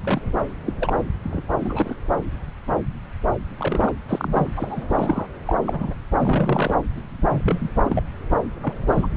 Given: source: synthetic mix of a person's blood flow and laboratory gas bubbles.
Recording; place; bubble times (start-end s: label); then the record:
Doppler ultrasound of blood flow; subclavian vein
0.03-0.40 s: bubbles
0.66-0.74 s: bubbles
0.80-1.03 s: bubbles
1.24-1.43 s: bubbles
1.58-1.96 s: bubbles
3.57-3.93 s: bubbles
4.08-4.53 s: bubbles
4.56-4.84 s: bubbles
4.88-5.26 s: bubbles
5.45-5.55 s: bubbles
5.61-5.94 s: bubbles
6.17-6.74 s: bubbles
7.28-7.70 s: bubbles
7.84-8.03 s: bubbles
8.62-8.74 s: bubbles
8.87-9.08 s: bubbles
From the record:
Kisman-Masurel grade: 232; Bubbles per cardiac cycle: several, 3 to 8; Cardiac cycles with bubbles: 50 to 99%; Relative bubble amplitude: moderate (0.250 to 0.450); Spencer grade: 3 (all of the cardiac periods contain showers or single bubble signals, but not dominating or overriding the cardiac motion signals); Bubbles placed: anywhere in the cardiac cycle